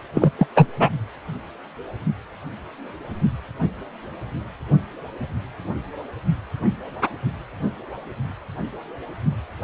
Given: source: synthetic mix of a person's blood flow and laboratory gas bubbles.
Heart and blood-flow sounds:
Doppler ultrasound of blood flow; precordium
0.14-0.31 s: bubbles
0.38-0.46 s: bubbles
0.55-0.67 s: bubbles
0.79-0.89 s: bubbles
From the record:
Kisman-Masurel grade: 213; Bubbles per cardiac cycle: several, 3 to 8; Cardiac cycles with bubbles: 1 to 10%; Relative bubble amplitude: loud (0.450 to 0.775); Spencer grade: 1 (occasional bubble signal discernible with the cardiac motion signal, with majority of cardiac periods free of bubbles); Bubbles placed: anywhere in the cardiac cycle

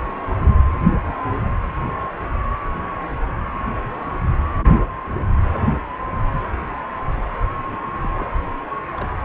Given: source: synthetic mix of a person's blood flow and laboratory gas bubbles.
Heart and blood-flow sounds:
Doppler ultrasound of blood flow; precordium
4.38-4.46 s: bubbles
4.59-4.83 s: bubbles
8.02-8.24 s: bubbles
8.93-9.10 s: bubbles
From the record:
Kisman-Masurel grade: 121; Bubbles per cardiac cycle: 1 to 2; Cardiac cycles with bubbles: 10 to 50%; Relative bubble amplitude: barely perceptible (0.100 to 0.250); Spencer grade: 2 (many but less than half of the cardiac periods contain bubble signals, singularly or in groups); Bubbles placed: anywhere in the cardiac cycle

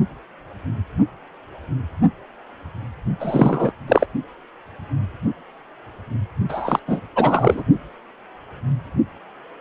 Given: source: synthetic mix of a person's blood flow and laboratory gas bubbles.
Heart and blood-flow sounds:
Doppler ultrasound of blood flow; precordium
3.20-3.72 s: bubbles
3.88-4.06 s: bubbles
6.49-6.79 s: bubbles
6.88-7.00 s: bubbles
7.16-7.63 s: bubbles
From the record:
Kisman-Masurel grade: 223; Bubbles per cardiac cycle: several, 3 to 8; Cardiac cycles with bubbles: 10 to 50%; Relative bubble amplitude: loud (0.450 to 0.775); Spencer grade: 2 (many but less than half of the cardiac periods contain bubble signals, singularly or in groups); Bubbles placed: only in the low amplitude regions of the cardiac cycle

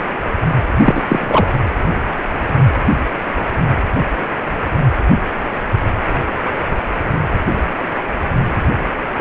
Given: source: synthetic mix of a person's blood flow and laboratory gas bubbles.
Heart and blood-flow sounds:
Doppler ultrasound of blood flow; precordium
0.77-1.03 s: bubbles
1.08-1.47 s: bubbles
From the record:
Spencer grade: 2 (many but less than half of the cardiac periods contain bubble signals, singularly or in groups); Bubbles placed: anywhere in the cardiac cycle

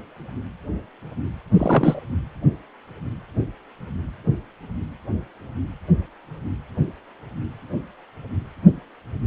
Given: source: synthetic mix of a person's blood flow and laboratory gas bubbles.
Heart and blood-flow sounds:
Doppler ultrasound of blood flow; precordium
1.53-2.00 s: bubbles
From the record:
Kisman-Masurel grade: 213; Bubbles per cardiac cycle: several, 3 to 8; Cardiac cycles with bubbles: 1 to 10%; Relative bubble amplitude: loud (0.450 to 0.775); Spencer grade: 1 (occasional bubble signal discernible with the cardiac motion signal, with majority of cardiac periods free of bubbles); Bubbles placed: anywhere in the cardiac cycle

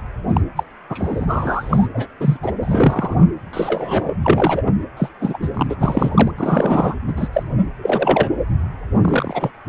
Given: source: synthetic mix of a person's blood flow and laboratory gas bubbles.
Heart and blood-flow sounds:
Doppler ultrasound of blood flow; precordium
0.28-0.41 s: bubbles
0.56-0.64 s: bubbles
0.89-1.88 s: bubbles
1.94-2.07 s: bubbles
2.19-2.37 s: bubbles
2.42-2.52 s: bubbles
2.61-3.31 s: bubbles
3.53-4.13 s: bubbles
4.22-4.63 s: bubbles
4.66-4.72 s: bubbles
4.96-5.08 s: bubbles
5.20-5.38 s: bubbles
5.42-5.49 s: bubbles
5.54-5.67 s: bubbles
5.69-5.75 s: bubbles
5.79-6.32 s: bubbles
6.37-6.95 s: bubbles
7.07-7.13 s: bubbles
7.17-7.28 s: bubbles
7.33-7.43 s: bubbles
7.82-8.31 s: bubbles
9.02-9.51 s: bubbles
From the record:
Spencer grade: 3 (all of the cardiac periods contain showers or single bubble signals, but not dominating or overriding the cardiac motion signals); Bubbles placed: anywhere in the cardiac cycle

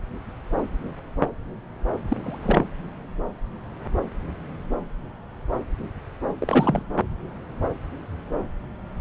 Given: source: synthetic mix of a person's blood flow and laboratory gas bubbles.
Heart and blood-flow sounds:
Doppler ultrasound of blood flow; subclavian vein
2.08-2.17 s: bubbles
2.24-2.64 s: bubbles
6.38-6.83 s: bubbles
From the record:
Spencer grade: 1 (occasional bubble signal discernible with the cardiac motion signal, with majority of cardiac periods free of bubbles); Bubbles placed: anywhere in the cardiac cycle

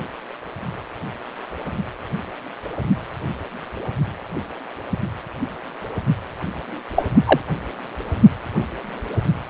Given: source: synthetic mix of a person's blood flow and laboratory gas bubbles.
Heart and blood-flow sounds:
Doppler ultrasound of blood flow; precordium
6.96-7.03 s: bubbles
7.25-7.39 s: bubbles
From the record:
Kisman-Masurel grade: 113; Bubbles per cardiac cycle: 1 to 2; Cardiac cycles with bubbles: 1 to 10%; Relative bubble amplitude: loud (0.450 to 0.775); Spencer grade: 1 (occasional bubble signal discernible with the cardiac motion signal, with majority of cardiac periods free of bubbles); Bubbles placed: anywhere in the cardiac cycle

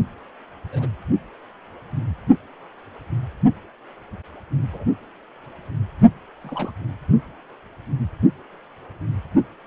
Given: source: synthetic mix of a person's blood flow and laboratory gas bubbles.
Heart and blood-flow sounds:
Doppler ultrasound of blood flow; precordium
0.72-0.88 s: bubbles
4.73-4.84 s: bubbles
6.44-6.71 s: bubbles
From the record:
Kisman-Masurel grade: 121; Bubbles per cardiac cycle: 1 to 2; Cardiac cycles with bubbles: 10 to 50%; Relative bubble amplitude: barely perceptible (0.100 to 0.250); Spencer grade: 2 (many but less than half of the cardiac periods contain bubble signals, singularly or in groups); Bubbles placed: only in the low amplitude regions of the cardiac cycle

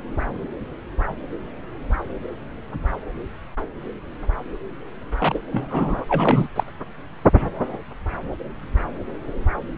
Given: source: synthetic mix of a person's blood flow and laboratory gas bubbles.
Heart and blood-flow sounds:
Doppler ultrasound of blood flow; subclavian vein
5.20-5.39 s: bubbles
5.52-6.04 s: bubbles
6.08-6.48 s: bubbles
6.55-6.63 s: bubbles
From the record:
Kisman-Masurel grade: 222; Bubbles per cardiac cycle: several, 3 to 8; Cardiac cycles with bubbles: 10 to 50%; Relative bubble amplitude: moderate (0.250 to 0.450); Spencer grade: 2 (many but less than half of the cardiac periods contain bubble signals, singularly or in groups); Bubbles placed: anywhere in the cardiac cycle

